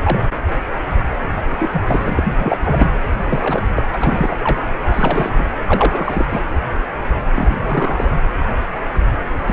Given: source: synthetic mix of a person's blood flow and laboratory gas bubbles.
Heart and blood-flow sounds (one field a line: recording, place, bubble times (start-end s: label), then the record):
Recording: Doppler ultrasound of blood flow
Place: precordium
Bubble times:
0.03-0.27 s: bubbles
1.48-1.70 s: bubbles
1.72-1.84 s: bubbles
1.87-2.13 s: bubbles
2.16-2.23 s: bubbles
2.38-2.57 s: bubbles
2.62-2.87 s: bubbles
3.29-3.62 s: bubbles
3.76-3.82 s: bubbles
3.94-4.64 s: bubbles
4.86-5.44 s: bubbles
5.56-5.63 s: bubbles
5.67-6.26 s: bubbles
6.29-6.40 s: bubbles
7.35-8.12 s: bubbles
9.46-9.53 s: bubbles
From the record:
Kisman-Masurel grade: 332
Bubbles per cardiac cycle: rolling drumbeat, 9 or more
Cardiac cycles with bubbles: 50 to 99%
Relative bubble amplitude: moderate (0.250 to 0.450)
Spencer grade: 3 (all of the cardiac periods contain showers or single bubble signals, but not dominating or overriding the cardiac motion signals)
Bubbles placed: anywhere in the cardiac cycle